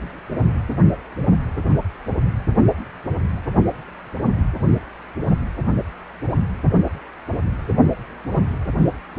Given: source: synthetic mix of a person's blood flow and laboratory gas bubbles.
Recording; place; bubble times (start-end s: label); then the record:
Doppler ultrasound of blood flow; precordium
no bubbles
From the record:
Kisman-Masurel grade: 000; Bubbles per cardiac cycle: 0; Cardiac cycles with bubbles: 0%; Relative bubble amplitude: no bubbles discernible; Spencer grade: 0 (complete lack of bubble signals)